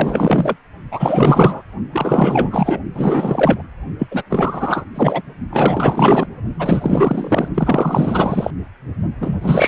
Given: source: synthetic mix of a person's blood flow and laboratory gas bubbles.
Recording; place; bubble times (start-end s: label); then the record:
Doppler ultrasound of blood flow; precordium
0.00-0.56 s: bubbles
0.91-1.62 s: bubbles
1.92-2.81 s: bubbles
2.95-3.62 s: bubbles
3.98-4.07 s: bubbles
4.11-4.23 s: bubbles
4.29-4.85 s: bubbles
4.94-5.21 s: bubbles
5.50-6.26 s: bubbles
6.58-7.49 s: bubbles
7.54-8.51 s: bubbles
9.21-9.68 s: bubbles
From the record:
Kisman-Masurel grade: 444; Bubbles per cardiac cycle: continuous sound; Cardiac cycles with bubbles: 100%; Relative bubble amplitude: maximal (0.775 to 0.999); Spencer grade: 4 (maximum detectable bubble signal sounding continuously throughout systole and diastole of every cardiac period, and overriding the amplitude of the normal cardiac signals); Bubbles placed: only in the low amplitude regions of the cardiac cycle